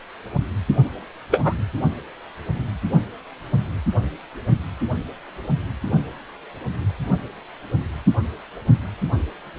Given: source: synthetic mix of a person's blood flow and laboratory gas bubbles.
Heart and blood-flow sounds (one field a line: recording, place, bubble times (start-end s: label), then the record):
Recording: Doppler ultrasound of blood flow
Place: precordium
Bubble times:
1.31-1.54 s: bubbles
From the record:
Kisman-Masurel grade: 113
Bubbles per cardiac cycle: 1 to 2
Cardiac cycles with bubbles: 1 to 10%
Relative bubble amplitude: loud (0.450 to 0.775)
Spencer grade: 1 (occasional bubble signal discernible with the cardiac motion signal, with majority of cardiac periods free of bubbles)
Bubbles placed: only in the low amplitude regions of the cardiac cycle